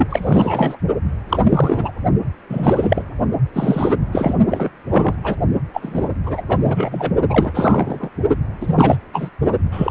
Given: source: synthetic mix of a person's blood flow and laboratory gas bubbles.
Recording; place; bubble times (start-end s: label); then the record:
Doppler ultrasound of blood flow; precordium
0.00-0.07 s: bubbles
0.09-0.77 s: bubbles
1.28-1.91 s: bubbles
2.49-3.02 s: bubbles
3.52-3.94 s: bubbles
4.12-4.34 s: bubbles
4.50-4.70 s: bubbles
4.88-5.15 s: bubbles
5.24-5.36 s: bubbles
5.74-6.08 s: bubbles
6.25-6.42 s: bubbles
6.49-7.11 s: bubbles
7.29-8.09 s: bubbles
8.61-8.98 s: bubbles
9.13-9.29 s: bubbles
9.71-9.91 s: bubbles
From the record:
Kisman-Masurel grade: 343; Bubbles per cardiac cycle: rolling drumbeat, 9 or more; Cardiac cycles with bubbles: 100%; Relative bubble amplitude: loud (0.450 to 0.775); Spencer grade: 3 (all of the cardiac periods contain showers or single bubble signals, but not dominating or overriding the cardiac motion signals); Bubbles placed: only in the low amplitude regions of the cardiac cycle